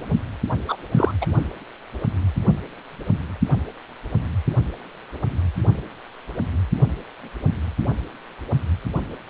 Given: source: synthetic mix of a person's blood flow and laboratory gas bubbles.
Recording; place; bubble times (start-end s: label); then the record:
Doppler ultrasound of blood flow; precordium
0.69-0.77 s: bubbles
0.96-1.11 s: bubbles
1.21-1.26 s: bubbles
From the record:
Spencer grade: 1 (occasional bubble signal discernible with the cardiac motion signal, with majority of cardiac periods free of bubbles); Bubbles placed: anywhere in the cardiac cycle